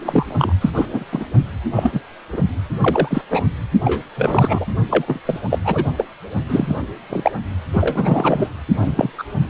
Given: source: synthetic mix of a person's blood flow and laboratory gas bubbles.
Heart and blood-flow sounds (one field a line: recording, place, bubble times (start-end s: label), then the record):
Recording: Doppler ultrasound of blood flow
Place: precordium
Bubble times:
0.00-0.53 s: bubbles
0.60-0.70 s: bubbles
0.74-0.86 s: bubbles
0.92-1.04 s: bubbles
1.12-1.26 s: bubbles
1.75-2.00 s: bubbles
2.33-2.42 s: bubbles
2.81-3.21 s: bubbles
3.30-3.44 s: bubbles
3.84-4.02 s: bubbles
4.16-4.65 s: bubbles
4.90-5.20 s: bubbles
5.26-5.38 s: bubbles
5.50-5.59 s: bubbles
5.64-5.85 s: bubbles
5.97-6.05 s: bubbles
6.48-6.80 s: bubbles
7.10-7.31 s: bubbles
7.73-8.48 s: bubbles
8.81-9.11 s: bubbles
9.18-9.23 s: bubbles
9.40-9.47 s: bubbles
From the record:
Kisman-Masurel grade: 243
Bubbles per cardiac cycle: several, 3 to 8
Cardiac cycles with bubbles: 100%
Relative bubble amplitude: loud (0.450 to 0.775)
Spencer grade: 3 (all of the cardiac periods contain showers or single bubble signals, but not dominating or overriding the cardiac motion signals)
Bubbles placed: only in the low amplitude regions of the cardiac cycle